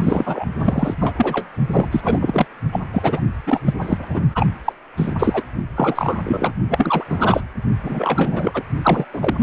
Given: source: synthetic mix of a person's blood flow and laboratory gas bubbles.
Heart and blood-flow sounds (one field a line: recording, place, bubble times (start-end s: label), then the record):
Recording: Doppler ultrasound of blood flow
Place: precordium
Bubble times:
0.00-0.45 s: bubbles
0.58-0.96 s: bubbles
1.01-1.48 s: bubbles
1.72-1.86 s: bubbles
1.92-2.46 s: bubbles
2.71-2.81 s: bubbles
2.94-3.21 s: bubbles
3.46-3.60 s: bubbles
3.65-3.73 s: bubbles
3.81-4.21 s: bubbles
4.34-4.46 s: bubbles
4.64-4.72 s: bubbles
4.97-5.12 s: bubbles
5.18-5.42 s: bubbles
5.75-6.52 s: bubbles
6.69-7.04 s: bubbles
7.08-7.40 s: bubbles
7.83-8.63 s: bubbles
8.83-9.05 s: bubbles
9.13-9.43 s: bubbles
From the record:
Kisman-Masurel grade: 343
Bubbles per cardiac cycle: rolling drumbeat, 9 or more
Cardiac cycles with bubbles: 100%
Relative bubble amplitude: loud (0.450 to 0.775)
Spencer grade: 3 (all of the cardiac periods contain showers or single bubble signals, but not dominating or overriding the cardiac motion signals)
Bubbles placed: only in the low amplitude regions of the cardiac cycle